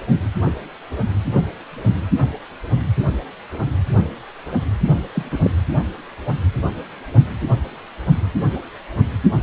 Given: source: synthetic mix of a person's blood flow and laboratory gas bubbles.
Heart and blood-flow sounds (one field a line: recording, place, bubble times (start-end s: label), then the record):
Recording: Doppler ultrasound of blood flow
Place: precordium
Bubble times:
5.14-5.23 s: bubbles
5.30-5.39 s: bubbles
5.42-5.50 s: bubbles
From the record:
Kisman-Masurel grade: 212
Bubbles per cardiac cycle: several, 3 to 8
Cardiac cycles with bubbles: 1 to 10%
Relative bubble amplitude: moderate (0.250 to 0.450)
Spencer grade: 1 (occasional bubble signal discernible with the cardiac motion signal, with majority of cardiac periods free of bubbles)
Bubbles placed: anywhere in the cardiac cycle